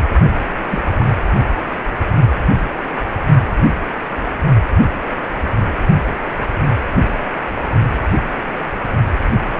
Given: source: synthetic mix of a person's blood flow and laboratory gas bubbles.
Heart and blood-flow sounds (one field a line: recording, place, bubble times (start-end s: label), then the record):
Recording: Doppler ultrasound of blood flow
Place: precordium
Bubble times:
0.69-0.84 s: bubbles
0.99-1.06 s: bubbles
From the record:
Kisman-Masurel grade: 112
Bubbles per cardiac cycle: 1 to 2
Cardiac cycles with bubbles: 1 to 10%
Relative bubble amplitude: moderate (0.250 to 0.450)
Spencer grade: 1 (occasional bubble signal discernible with the cardiac motion signal, with majority of cardiac periods free of bubbles)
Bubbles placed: only in the low amplitude regions of the cardiac cycle